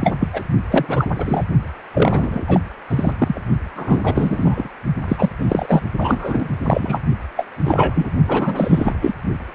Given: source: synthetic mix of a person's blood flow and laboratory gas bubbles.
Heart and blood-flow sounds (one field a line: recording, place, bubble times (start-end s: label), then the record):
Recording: Doppler ultrasound of blood flow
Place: precordium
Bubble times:
0.01-0.16 s: bubbles
0.20-0.28 s: bubbles
0.33-0.43 s: bubbles
0.70-1.06 s: bubbles
1.16-1.44 s: bubbles
1.93-2.60 s: bubbles
2.89-3.13 s: bubbles
3.19-3.41 s: bubbles
3.76-4.68 s: bubbles
5.08-5.29 s: bubbles
5.38-5.83 s: bubbles
5.99-6.48 s: bubbles
6.60-7.01 s: bubbles
7.36-7.46 s: bubbles
7.64-8.10 s: bubbles
8.27-8.94 s: bubbles
9.01-9.13 s: bubbles
From the record:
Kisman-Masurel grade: 343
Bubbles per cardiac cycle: rolling drumbeat, 9 or more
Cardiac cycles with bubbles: 100%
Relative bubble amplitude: loud (0.450 to 0.775)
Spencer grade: 3 (all of the cardiac periods contain showers or single bubble signals, but not dominating or overriding the cardiac motion signals)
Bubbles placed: only in the low amplitude regions of the cardiac cycle